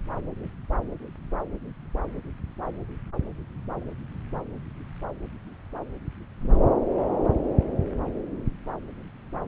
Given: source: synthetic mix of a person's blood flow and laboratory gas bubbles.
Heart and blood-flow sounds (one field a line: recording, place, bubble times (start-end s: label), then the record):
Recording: Doppler ultrasound of blood flow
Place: subclavian vein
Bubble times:
no bubbles
From the record:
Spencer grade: 0 (complete lack of bubble signals)